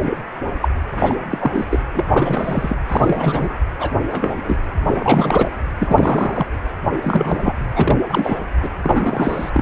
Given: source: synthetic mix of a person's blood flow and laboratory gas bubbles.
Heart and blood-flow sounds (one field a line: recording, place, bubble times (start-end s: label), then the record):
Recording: Doppler ultrasound of blood flow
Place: precordium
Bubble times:
0.01-0.17 s: bubbles
0.61-0.68 s: bubbles
0.90-1.16 s: bubbles
1.29-1.65 s: bubbles
1.70-1.79 s: bubbles
1.94-2.05 s: bubbles
2.10-2.75 s: bubbles
2.89-3.51 s: bubbles
3.80-3.91 s: bubbles
4.11-4.57 s: bubbles
4.85-5.53 s: bubbles
5.78-6.46 s: bubbles
7.02-7.53 s: bubbles
7.75-7.98 s: bubbles
8.09-8.39 s: bubbles
8.62-8.70 s: bubbles
8.83-9.50 s: bubbles
9.54-9.62 s: bubbles
From the record:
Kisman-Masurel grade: 242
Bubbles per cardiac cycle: several, 3 to 8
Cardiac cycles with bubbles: 100%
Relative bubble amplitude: moderate (0.250 to 0.450)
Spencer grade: 3 (all of the cardiac periods contain showers or single bubble signals, but not dominating or overriding the cardiac motion signals)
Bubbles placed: anywhere in the cardiac cycle